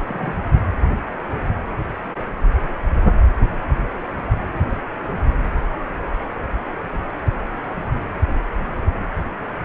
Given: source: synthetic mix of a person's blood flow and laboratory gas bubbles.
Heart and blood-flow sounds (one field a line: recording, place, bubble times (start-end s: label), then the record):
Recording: Doppler ultrasound of blood flow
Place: precordium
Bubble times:
0.08-0.34 s: bubbles
From the record:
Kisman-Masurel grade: 122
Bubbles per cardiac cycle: 1 to 2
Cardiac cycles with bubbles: 10 to 50%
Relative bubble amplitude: moderate (0.250 to 0.450)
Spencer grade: 2 (many but less than half of the cardiac periods contain bubble signals, singularly or in groups)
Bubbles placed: anywhere in the cardiac cycle